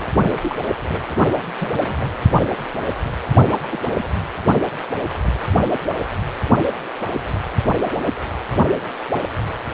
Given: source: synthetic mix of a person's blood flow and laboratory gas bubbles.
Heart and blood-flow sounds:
Doppler ultrasound of blood flow; precordium
0.00-0.07 s: bubbles
0.42-0.56 s: bubbles
0.88-1.02 s: bubbles
1.08-1.16 s: bubbles
1.59-1.77 s: bubbles
1.84-2.10 s: bubbles
3.51-3.56 s: bubbles
3.61-4.04 s: bubbles
From the record:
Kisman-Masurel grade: 221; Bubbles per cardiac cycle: several, 3 to 8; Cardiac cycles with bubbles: 10 to 50%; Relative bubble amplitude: barely perceptible (0.100 to 0.250); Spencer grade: 2 (many but less than half of the cardiac periods contain bubble signals, singularly or in groups); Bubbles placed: anywhere in the cardiac cycle

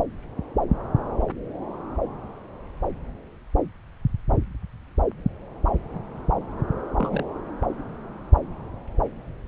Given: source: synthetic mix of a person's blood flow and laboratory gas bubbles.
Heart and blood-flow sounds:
Doppler ultrasound of blood flow; subclavian vein
6.97-7.26 s: bubbles
From the record:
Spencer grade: 1 (occasional bubble signal discernible with the cardiac motion signal, with majority of cardiac periods free of bubbles); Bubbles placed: anywhere in the cardiac cycle

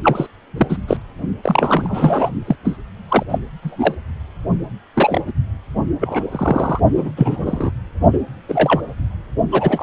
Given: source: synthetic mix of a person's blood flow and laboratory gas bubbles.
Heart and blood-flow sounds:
Doppler ultrasound of blood flow; precordium
0.03-0.27 s: bubbles
0.57-0.77 s: bubbles
0.87-0.97 s: bubbles
1.43-2.30 s: bubbles
2.46-2.56 s: bubbles
2.65-2.77 s: bubbles
3.08-3.23 s: bubbles
3.29-3.39 s: bubbles
3.62-3.95 s: bubbles
4.94-5.21 s: bubbles
5.27-5.32 s: bubbles
6.00-6.21 s: bubbles
6.31-6.79 s: bubbles
6.96-7.12 s: bubbles
7.16-7.70 s: bubbles
8.12-8.19 s: bubbles
8.48-8.81 s: bubbles
9.52-9.82 s: bubbles
From the record:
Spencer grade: 3 (all of the cardiac periods contain showers or single bubble signals, but not dominating or overriding the cardiac motion signals); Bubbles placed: only in the low amplitude regions of the cardiac cycle

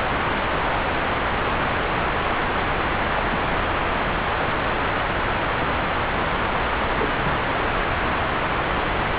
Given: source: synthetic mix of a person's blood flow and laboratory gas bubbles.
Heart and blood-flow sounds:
Doppler ultrasound of blood flow; subclavian vein
3.10-3.21 s: bubbles
3.29-3.40 s: bubbles
5.59-5.67 s: bubbles
7.00-7.07 s: bubbles
7.26-7.37 s: bubbles
From the record:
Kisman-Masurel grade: 121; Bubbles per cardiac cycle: 1 to 2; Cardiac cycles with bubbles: 10 to 50%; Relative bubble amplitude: barely perceptible (0.100 to 0.250); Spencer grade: 2 (many but less than half of the cardiac periods contain bubble signals, singularly or in groups); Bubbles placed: anywhere in the cardiac cycle

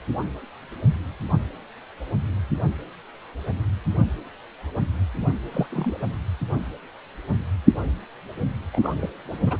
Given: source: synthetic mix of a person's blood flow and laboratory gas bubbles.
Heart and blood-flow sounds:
Doppler ultrasound of blood flow; precordium
5.20-5.29 s: bubbles
5.52-5.66 s: bubbles
5.71-5.97 s: bubbles
8.72-8.79 s: bubbles
8.83-9.10 s: bubbles
9.31-9.38 s: bubbles
9.46-9.57 s: bubbles
From the record:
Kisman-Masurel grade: 221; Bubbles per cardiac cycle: several, 3 to 8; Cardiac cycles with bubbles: 10 to 50%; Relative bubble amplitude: barely perceptible (0.100 to 0.250); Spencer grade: 2 (many but less than half of the cardiac periods contain bubble signals, singularly or in groups); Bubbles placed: anywhere in the cardiac cycle

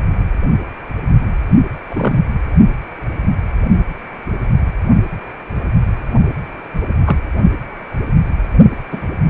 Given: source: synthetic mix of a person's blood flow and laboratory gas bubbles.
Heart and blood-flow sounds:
Doppler ultrasound of blood flow; precordium
1.90-2.23 s: bubbles
7.05-7.17 s: bubbles
8.92-9.07 s: bubbles
From the record:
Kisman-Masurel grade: 123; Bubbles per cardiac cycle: 1 to 2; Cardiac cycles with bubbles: 10 to 50%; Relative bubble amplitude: loud (0.450 to 0.775); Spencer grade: 2 (many but less than half of the cardiac periods contain bubble signals, singularly or in groups); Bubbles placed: only in the low amplitude regions of the cardiac cycle

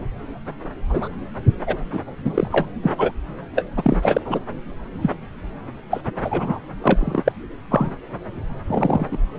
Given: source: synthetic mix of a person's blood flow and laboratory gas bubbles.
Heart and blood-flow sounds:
Doppler ultrasound of blood flow; subclavian vein
0.90-1.08 s: bubbles
1.67-1.78 s: bubbles
1.93-2.00 s: bubbles
2.24-2.48 s: bubbles
2.52-2.67 s: bubbles
2.83-2.90 s: bubbles
2.97-3.11 s: bubbles
3.54-3.65 s: bubbles
3.76-4.40 s: bubbles
5.02-5.16 s: bubbles
5.90-6.01 s: bubbles
6.24-6.60 s: bubbles
6.81-7.32 s: bubbles
7.70-7.90 s: bubbles
8.66-9.06 s: bubbles
9.11-9.17 s: bubbles
From the record:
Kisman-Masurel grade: 243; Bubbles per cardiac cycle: several, 3 to 8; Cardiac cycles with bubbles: 100%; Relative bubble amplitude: loud (0.450 to 0.775); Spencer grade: 3 (all of the cardiac periods contain showers or single bubble signals, but not dominating or overriding the cardiac motion signals); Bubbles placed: anywhere in the cardiac cycle

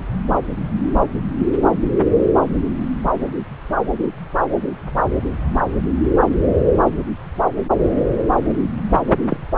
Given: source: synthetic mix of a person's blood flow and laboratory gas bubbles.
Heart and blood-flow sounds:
Doppler ultrasound of blood flow; subclavian vein
8.94-9.03 s: bubbles
9.29-9.37 s: bubbles
From the record:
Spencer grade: 1 (occasional bubble signal discernible with the cardiac motion signal, with majority of cardiac periods free of bubbles); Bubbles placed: anywhere in the cardiac cycle

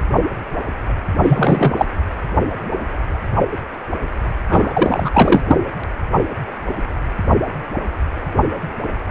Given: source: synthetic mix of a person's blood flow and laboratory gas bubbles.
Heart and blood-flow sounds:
Doppler ultrasound of blood flow; precordium
1.23-1.74 s: bubbles
1.76-1.86 s: bubbles
4.49-5.10 s: bubbles
5.12-5.42 s: bubbles
5.47-5.57 s: bubbles
From the record:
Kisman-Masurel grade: 223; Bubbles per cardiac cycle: several, 3 to 8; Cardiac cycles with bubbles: 10 to 50%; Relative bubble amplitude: loud (0.450 to 0.775); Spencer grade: 2 (many but less than half of the cardiac periods contain bubble signals, singularly or in groups); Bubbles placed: anywhere in the cardiac cycle

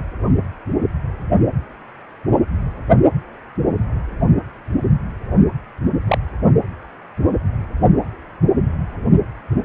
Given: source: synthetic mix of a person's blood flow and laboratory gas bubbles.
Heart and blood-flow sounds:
Doppler ultrasound of blood flow; precordium
6.08-6.18 s: bubbles
From the record:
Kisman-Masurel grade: 122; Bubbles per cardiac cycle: 1 to 2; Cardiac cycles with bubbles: 10 to 50%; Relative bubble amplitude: moderate (0.250 to 0.450); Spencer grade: 2 (many but less than half of the cardiac periods contain bubble signals, singularly or in groups); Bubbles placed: only in the low amplitude regions of the cardiac cycle

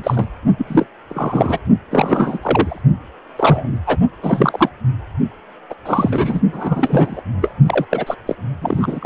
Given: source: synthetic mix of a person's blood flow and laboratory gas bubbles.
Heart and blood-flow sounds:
Doppler ultrasound of blood flow; precordium
0.00-0.29 s: bubbles
0.57-0.86 s: bubbles
1.09-1.58 s: bubbles
1.91-2.39 s: bubbles
2.42-2.81 s: bubbles
3.36-3.77 s: bubbles
3.86-3.97 s: bubbles
4.22-4.69 s: bubbles
5.70-5.74 s: bubbles
5.86-6.41 s: bubbles
6.53-7.21 s: bubbles
7.41-7.52 s: bubbles
7.66-7.85 s: bubbles
7.90-8.14 s: bubbles
8.26-8.36 s: bubbles
8.62-9.06 s: bubbles
From the record:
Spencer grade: 3 (all of the cardiac periods contain showers or single bubble signals, but not dominating or overriding the cardiac motion signals); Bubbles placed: only in the low amplitude regions of the cardiac cycle

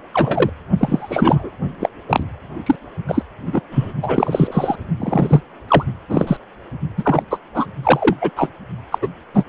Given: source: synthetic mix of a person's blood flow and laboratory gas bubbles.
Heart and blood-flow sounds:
Doppler ultrasound of blood flow; precordium
0.14-0.50 s: bubbles
0.77-1.51 s: bubbles
1.80-1.89 s: bubbles
2.08-2.23 s: bubbles
2.66-2.75 s: bubbles
3.07-3.22 s: bubbles
3.46-3.60 s: bubbles
3.71-3.93 s: bubbles
4.03-4.75 s: bubbles
5.00-5.41 s: bubbles
5.68-5.84 s: bubbles
6.09-6.37 s: bubbles
6.98-7.23 s: bubbles
7.29-7.39 s: bubbles
7.54-7.66 s: bubbles
7.83-8.16 s: bubbles
8.21-8.30 s: bubbles
8.36-8.50 s: bubbles
8.92-8.98 s: bubbles
9.01-9.08 s: bubbles
9.34-9.45 s: bubbles
From the record:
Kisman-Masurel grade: 243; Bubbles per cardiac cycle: several, 3 to 8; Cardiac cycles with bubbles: 100%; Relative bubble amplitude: loud (0.450 to 0.775); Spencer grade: 3 (all of the cardiac periods contain showers or single bubble signals, but not dominating or overriding the cardiac motion signals); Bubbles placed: only in the low amplitude regions of the cardiac cycle

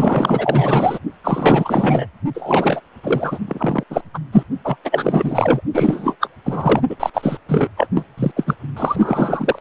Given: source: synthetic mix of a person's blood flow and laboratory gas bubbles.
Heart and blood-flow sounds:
Doppler ultrasound of blood flow; precordium
0.00-0.99 s: bubbles
1.23-2.06 s: bubbles
2.34-2.81 s: bubbles
3.03-3.38 s: bubbles
3.48-3.83 s: bubbles
3.90-4.01 s: bubbles
4.14-4.19 s: bubbles
4.32-4.43 s: bubbles
4.64-4.77 s: bubbles
4.85-5.61 s: bubbles
5.74-6.16 s: bubbles
6.20-6.28 s: bubbles
6.45-6.81 s: bubbles
6.89-6.96 s: bubbles
7.00-7.10 s: bubbles
7.14-7.38 s: bubbles
7.48-7.68 s: bubbles
7.77-7.87 s: bubbles
7.95-8.05 s: bubbles
8.17-8.31 s: bubbles
8.36-8.44 s: bubbles
8.46-8.54 s: bubbles
8.76-9.58 s: bubbles
From the record:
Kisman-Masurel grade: 444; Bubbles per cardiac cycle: continuous sound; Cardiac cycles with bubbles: 100%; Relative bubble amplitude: maximal (0.775 to 0.999); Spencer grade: 4 (maximum detectable bubble signal sounding continuously throughout systole and diastole of every cardiac period, and overriding the amplitude of the normal cardiac signals); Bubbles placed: only in the low amplitude regions of the cardiac cycle

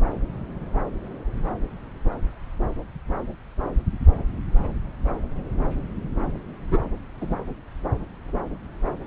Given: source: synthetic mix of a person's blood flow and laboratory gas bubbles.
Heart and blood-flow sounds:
Doppler ultrasound of blood flow; subclavian vein
6.71-6.79 s: bubbles
7.21-7.35 s: bubbles
From the record:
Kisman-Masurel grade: 112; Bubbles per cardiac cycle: 1 to 2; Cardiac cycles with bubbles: 1 to 10%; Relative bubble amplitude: moderate (0.250 to 0.450); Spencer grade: 1 (occasional bubble signal discernible with the cardiac motion signal, with majority of cardiac periods free of bubbles); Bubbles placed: anywhere in the cardiac cycle

